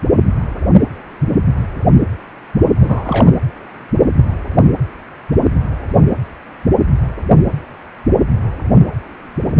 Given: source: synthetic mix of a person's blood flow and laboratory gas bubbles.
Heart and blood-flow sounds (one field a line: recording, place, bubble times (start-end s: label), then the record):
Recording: Doppler ultrasound of blood flow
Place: precordium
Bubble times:
2.81-3.38 s: bubbles
9.56-9.60 s: bubbles
From the record:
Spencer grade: 1 (occasional bubble signal discernible with the cardiac motion signal, with majority of cardiac periods free of bubbles)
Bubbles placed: anywhere in the cardiac cycle